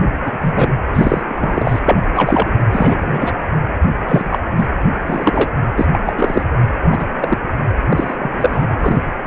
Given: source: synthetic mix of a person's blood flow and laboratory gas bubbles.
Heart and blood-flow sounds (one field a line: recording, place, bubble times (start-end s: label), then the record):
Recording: Doppler ultrasound of blood flow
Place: precordium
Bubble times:
0.24-0.38 s: bubbles
0.41-0.73 s: bubbles
0.93-1.22 s: bubbles
1.26-1.79 s: bubbles
1.85-2.05 s: bubbles
2.15-2.49 s: bubbles
2.58-2.64 s: bubbles
2.72-3.33 s: bubbles
4.07-4.38 s: bubbles
4.55-4.67 s: bubbles
5.06-5.50 s: bubbles
5.77-5.85 s: bubbles
5.92-6.00 s: bubbles
6.04-6.12 s: bubbles
6.17-6.44 s: bubbles
6.91-7.13 s: bubbles
7.21-7.38 s: bubbles
7.90-8.16 s: bubbles
8.19-8.66 s: bubbles
8.78-9.02 s: bubbles
9.25-9.27 s: bubbles
From the record:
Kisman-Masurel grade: 243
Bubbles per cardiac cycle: several, 3 to 8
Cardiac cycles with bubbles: 100%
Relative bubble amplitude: loud (0.450 to 0.775)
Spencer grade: 3 (all of the cardiac periods contain showers or single bubble signals, but not dominating or overriding the cardiac motion signals)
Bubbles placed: anywhere in the cardiac cycle